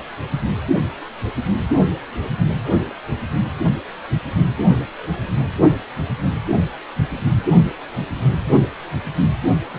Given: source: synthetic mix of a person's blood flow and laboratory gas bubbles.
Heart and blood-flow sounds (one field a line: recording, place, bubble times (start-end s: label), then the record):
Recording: Doppler ultrasound of blood flow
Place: precordium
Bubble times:
2.24-2.35 s: bubbles
2.64-2.75 s: bubbles
2.90-2.93 s: bubbles
5.56-5.70 s: bubbles
8.46-8.68 s: bubbles
9.73-9.79 s: bubbles
From the record:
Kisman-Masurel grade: 121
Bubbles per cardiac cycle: 1 to 2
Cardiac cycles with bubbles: 10 to 50%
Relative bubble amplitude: barely perceptible (0.100 to 0.250)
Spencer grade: 2 (many but less than half of the cardiac periods contain bubble signals, singularly or in groups)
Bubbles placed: anywhere in the cardiac cycle